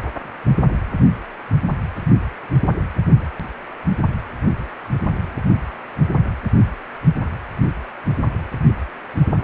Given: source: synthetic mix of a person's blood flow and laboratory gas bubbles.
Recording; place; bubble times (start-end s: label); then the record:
Doppler ultrasound of blood flow; precordium
4.06-4.12 s: bubbles
From the record:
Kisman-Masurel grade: 121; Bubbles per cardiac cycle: 1 to 2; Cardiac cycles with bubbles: 10 to 50%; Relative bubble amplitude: barely perceptible (0.100 to 0.250); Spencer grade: 2 (many but less than half of the cardiac periods contain bubble signals, singularly or in groups); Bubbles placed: anywhere in the cardiac cycle